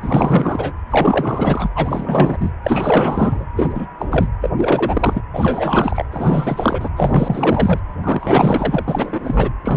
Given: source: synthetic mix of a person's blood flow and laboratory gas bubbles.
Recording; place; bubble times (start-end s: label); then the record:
Doppler ultrasound of blood flow; precordium
0.00-0.74 s: bubbles
0.89-1.69 s: bubbles
1.74-2.53 s: bubbles
2.64-3.45 s: bubbles
3.56-3.88 s: bubbles
3.98-4.07 s: bubbles
4.10-4.29 s: bubbles
4.41-4.50 s: bubbles
4.57-5.22 s: bubbles
5.33-6.04 s: bubbles
6.11-6.89 s: bubbles
6.96-7.80 s: bubbles
8.04-8.85 s: bubbles
8.88-9.53 s: bubbles
9.64-9.77 s: bubbles
From the record:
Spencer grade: 4 (maximum detectable bubble signal sounding continuously throughout systole and diastole of every cardiac period, and overriding the amplitude of the normal cardiac signals); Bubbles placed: anywhere in the cardiac cycle